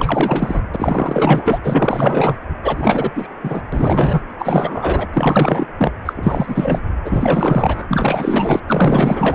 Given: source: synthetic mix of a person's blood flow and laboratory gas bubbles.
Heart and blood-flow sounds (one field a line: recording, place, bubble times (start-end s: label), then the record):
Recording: Doppler ultrasound of blood flow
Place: precordium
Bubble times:
0.00-0.65 s: bubbles
0.71-1.59 s: bubbles
1.64-2.36 s: bubbles
2.62-3.10 s: bubbles
3.15-3.28 s: bubbles
3.44-3.63 s: bubbles
3.72-4.21 s: bubbles
4.38-5.06 s: bubbles
5.13-5.66 s: bubbles
5.78-5.92 s: bubbles
6.05-6.13 s: bubbles
6.16-6.82 s: bubbles
7.04-8.60 s: bubbles
8.69-9.35 s: bubbles
From the record:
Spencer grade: 4 (maximum detectable bubble signal sounding continuously throughout systole and diastole of every cardiac period, and overriding the amplitude of the normal cardiac signals)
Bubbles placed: anywhere in the cardiac cycle